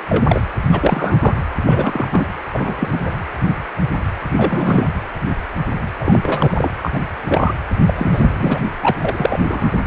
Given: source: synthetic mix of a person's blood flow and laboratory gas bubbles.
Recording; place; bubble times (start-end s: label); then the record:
Doppler ultrasound of blood flow; precordium
0.09-0.42 s: bubbles
0.71-1.34 s: bubbles
1.66-2.27 s: bubbles
2.51-3.12 s: bubbles
4.25-4.93 s: bubbles
5.99-6.19 s: bubbles
6.22-6.71 s: bubbles
6.83-6.91 s: bubbles
6.94-7.00 s: bubbles
7.28-7.53 s: bubbles
7.86-7.94 s: bubbles
7.97-8.68 s: bubbles
8.81-8.90 s: bubbles
9.00-9.72 s: bubbles
From the record:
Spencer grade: 3 (all of the cardiac periods contain showers or single bubble signals, but not dominating or overriding the cardiac motion signals); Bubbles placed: anywhere in the cardiac cycle